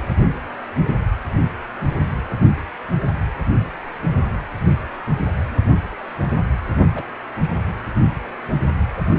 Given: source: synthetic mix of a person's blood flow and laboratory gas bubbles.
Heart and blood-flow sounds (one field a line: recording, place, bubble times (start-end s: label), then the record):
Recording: Doppler ultrasound of blood flow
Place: precordium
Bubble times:
6.95-7.06 s: bubbles
7.41-7.48 s: bubbles
From the record:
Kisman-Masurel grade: 111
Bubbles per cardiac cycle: 1 to 2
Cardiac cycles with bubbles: 1 to 10%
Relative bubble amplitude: barely perceptible (0.100 to 0.250)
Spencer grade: 1 (occasional bubble signal discernible with the cardiac motion signal, with majority of cardiac periods free of bubbles)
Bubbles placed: anywhere in the cardiac cycle